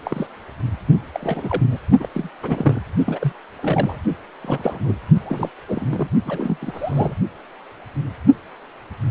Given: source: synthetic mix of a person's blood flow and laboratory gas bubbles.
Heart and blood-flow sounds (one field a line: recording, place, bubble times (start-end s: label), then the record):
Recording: Doppler ultrasound of blood flow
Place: precordium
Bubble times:
0.05-0.27 s: bubbles
1.12-1.62 s: bubbles
1.70-1.79 s: bubbles
2.00-2.08 s: bubbles
2.14-2.29 s: bubbles
2.42-2.83 s: bubbles
3.06-3.33 s: bubbles
3.61-3.97 s: bubbles
4.43-4.96 s: bubbles
5.25-5.49 s: bubbles
5.68-6.09 s: bubbles
6.25-6.57 s: bubbles
6.61-7.16 s: bubbles
From the record:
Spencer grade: 3 (all of the cardiac periods contain showers or single bubble signals, but not dominating or overriding the cardiac motion signals)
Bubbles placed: only in the low amplitude regions of the cardiac cycle